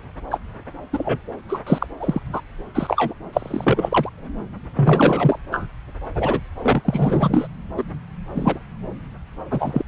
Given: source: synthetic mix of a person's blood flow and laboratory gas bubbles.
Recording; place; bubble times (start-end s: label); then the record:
Doppler ultrasound of blood flow; subclavian vein
0.30-0.39 s: bubbles
0.92-1.18 s: bubbles
1.48-1.58 s: bubbles
1.67-1.86 s: bubbles
2.00-2.19 s: bubbles
2.33-2.41 s: bubbles
2.75-3.13 s: bubbles
3.33-4.09 s: bubbles
4.75-5.39 s: bubbles
5.51-5.66 s: bubbles
6.15-6.40 s: bubbles
6.62-6.82 s: bubbles
6.84-7.47 s: bubbles
7.77-7.83 s: bubbles
8.35-8.59 s: bubbles
9.51-9.83 s: bubbles
From the record:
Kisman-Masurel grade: 242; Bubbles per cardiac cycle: several, 3 to 8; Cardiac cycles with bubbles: 100%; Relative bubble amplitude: moderate (0.250 to 0.450); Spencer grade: 3 (all of the cardiac periods contain showers or single bubble signals, but not dominating or overriding the cardiac motion signals); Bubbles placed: anywhere in the cardiac cycle